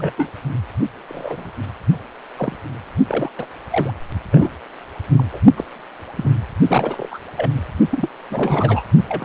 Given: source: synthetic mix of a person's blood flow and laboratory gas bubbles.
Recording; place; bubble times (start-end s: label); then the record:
Doppler ultrasound of blood flow; precordium
0.00-0.12 s: bubbles
0.18-0.30 s: bubbles
1.07-1.51 s: bubbles
2.36-2.56 s: bubbles
3.08-3.30 s: bubbles
3.38-3.46 s: bubbles
3.71-3.93 s: bubbles
4.32-4.49 s: bubbles
5.17-5.38 s: bubbles
5.57-5.64 s: bubbles
6.17-6.31 s: bubbles
6.67-7.18 s: bubbles
7.38-7.51 s: bubbles
7.90-8.09 s: bubbles
8.30-8.84 s: bubbles
9.09-9.25 s: bubbles
From the record:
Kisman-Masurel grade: 242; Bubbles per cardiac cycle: several, 3 to 8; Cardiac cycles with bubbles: 100%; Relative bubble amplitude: moderate (0.250 to 0.450); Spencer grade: 3 (all of the cardiac periods contain showers or single bubble signals, but not dominating or overriding the cardiac motion signals); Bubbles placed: only in the low amplitude regions of the cardiac cycle